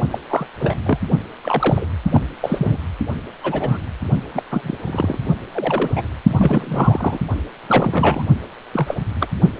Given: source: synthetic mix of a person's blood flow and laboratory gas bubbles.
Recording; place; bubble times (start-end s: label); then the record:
Doppler ultrasound of blood flow; precordium
0.11-0.18 s: bubbles
0.30-0.46 s: bubbles
0.59-0.74 s: bubbles
0.85-0.98 s: bubbles
1.43-1.85 s: bubbles
2.05-2.23 s: bubbles
2.41-2.78 s: bubbles
3.43-3.78 s: bubbles
4.33-4.42 s: bubbles
4.51-4.77 s: bubbles
4.86-5.18 s: bubbles
5.52-6.08 s: bubbles
6.27-7.18 s: bubbles
7.67-8.23 s: bubbles
8.73-8.95 s: bubbles
9.20-9.27 s: bubbles
From the record:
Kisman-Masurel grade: 242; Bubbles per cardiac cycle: several, 3 to 8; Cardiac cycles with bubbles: 100%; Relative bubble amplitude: moderate (0.250 to 0.450); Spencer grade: 3 (all of the cardiac periods contain showers or single bubble signals, but not dominating or overriding the cardiac motion signals); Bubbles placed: only in the low amplitude regions of the cardiac cycle